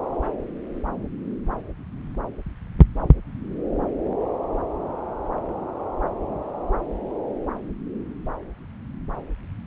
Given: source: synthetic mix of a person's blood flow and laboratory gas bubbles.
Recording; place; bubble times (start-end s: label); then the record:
Doppler ultrasound of blood flow; subclavian vein
no bubbles
From the record:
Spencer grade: 0 (complete lack of bubble signals)